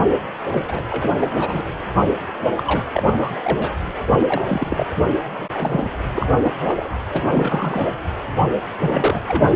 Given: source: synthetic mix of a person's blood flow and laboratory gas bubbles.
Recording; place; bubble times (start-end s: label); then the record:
Doppler ultrasound of blood flow; precordium
0.51-0.65 s: bubbles
0.68-0.82 s: bubbles
0.90-1.12 s: bubbles
1.20-1.28 s: bubbles
1.34-1.64 s: bubbles
2.42-2.50 s: bubbles
2.56-2.64 s: bubbles
2.67-2.83 s: bubbles
2.92-3.03 s: bubbles
3.06-3.14 s: bubbles
3.17-3.31 s: bubbles
3.44-3.75 s: bubbles
4.16-4.87 s: bubbles
4.96-5.02 s: bubbles
5.38-5.46 s: bubbles
5.54-5.91 s: bubbles
6.15-6.26 s: bubbles
6.43-6.51 s: bubbles
6.65-6.89 s: bubbles
7.12-7.24 s: bubbles
7.32-7.85 s: bubbles
8.36-8.42 s: bubbles
8.80-9.22 s: bubbles
9.28-9.50 s: bubbles
From the record:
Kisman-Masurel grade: 242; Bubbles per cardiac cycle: several, 3 to 8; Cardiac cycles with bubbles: 100%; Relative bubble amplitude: moderate (0.250 to 0.450); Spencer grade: 3 (all of the cardiac periods contain showers or single bubble signals, but not dominating or overriding the cardiac motion signals); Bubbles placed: anywhere in the cardiac cycle